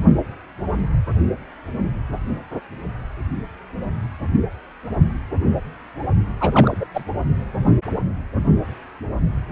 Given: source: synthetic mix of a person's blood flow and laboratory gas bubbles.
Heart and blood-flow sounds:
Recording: Doppler ultrasound of blood flow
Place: precordium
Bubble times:
6.40-6.77 s: bubbles
6.80-6.85 s: bubbles
6.94-7.04 s: bubbles
From the record:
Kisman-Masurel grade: 213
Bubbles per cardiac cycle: several, 3 to 8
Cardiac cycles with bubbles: 1 to 10%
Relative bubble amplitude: loud (0.450 to 0.775)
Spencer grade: 1 (occasional bubble signal discernible with the cardiac motion signal, with majority of cardiac periods free of bubbles)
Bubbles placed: only in the low amplitude regions of the cardiac cycle

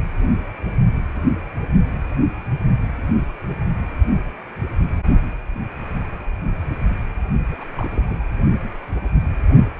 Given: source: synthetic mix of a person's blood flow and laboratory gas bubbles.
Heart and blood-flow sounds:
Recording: Doppler ultrasound of blood flow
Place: precordium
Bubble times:
7.51-7.64 s: bubbles
7.76-8.21 s: bubbles
From the record:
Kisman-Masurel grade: 211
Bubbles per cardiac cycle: several, 3 to 8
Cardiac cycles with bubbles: 1 to 10%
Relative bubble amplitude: barely perceptible (0.100 to 0.250)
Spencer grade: 1 (occasional bubble signal discernible with the cardiac motion signal, with majority of cardiac periods free of bubbles)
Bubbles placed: only in the low amplitude regions of the cardiac cycle

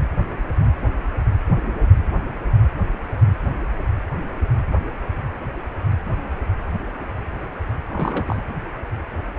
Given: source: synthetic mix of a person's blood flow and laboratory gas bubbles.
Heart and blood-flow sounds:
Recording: Doppler ultrasound of blood flow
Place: precordium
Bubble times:
7.88-8.43 s: bubbles
From the record:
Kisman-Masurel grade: 211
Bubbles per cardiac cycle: several, 3 to 8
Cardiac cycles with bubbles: 1 to 10%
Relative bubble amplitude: barely perceptible (0.100 to 0.250)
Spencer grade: 1 (occasional bubble signal discernible with the cardiac motion signal, with majority of cardiac periods free of bubbles)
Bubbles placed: anywhere in the cardiac cycle

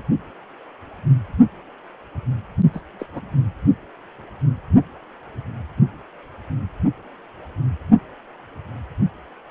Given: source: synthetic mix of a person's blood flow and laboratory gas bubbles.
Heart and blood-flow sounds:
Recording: Doppler ultrasound of blood flow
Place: precordium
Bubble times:
2.73-2.81 s: bubbles
2.99-3.06 s: bubbles
3.12-3.21 s: bubbles
From the record:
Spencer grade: 1 (occasional bubble signal discernible with the cardiac motion signal, with majority of cardiac periods free of bubbles)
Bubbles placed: only in the low amplitude regions of the cardiac cycle

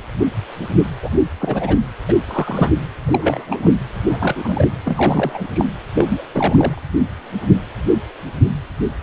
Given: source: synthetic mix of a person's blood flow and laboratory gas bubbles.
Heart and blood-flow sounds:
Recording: Doppler ultrasound of blood flow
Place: precordium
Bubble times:
1.02-1.09 s: bubbles
1.41-1.77 s: bubbles
2.08-2.14 s: bubbles
2.25-2.70 s: bubbles
3.07-3.71 s: bubbles
4.06-4.67 s: bubbles
4.84-5.43 s: bubbles
5.54-5.65 s: bubbles
5.95-6.23 s: bubbles
6.33-6.83 s: bubbles
From the record:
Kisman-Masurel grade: 232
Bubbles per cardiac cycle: several, 3 to 8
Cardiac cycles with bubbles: 50 to 99%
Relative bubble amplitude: moderate (0.250 to 0.450)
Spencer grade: 3 (all of the cardiac periods contain showers or single bubble signals, but not dominating or overriding the cardiac motion signals)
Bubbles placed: anywhere in the cardiac cycle

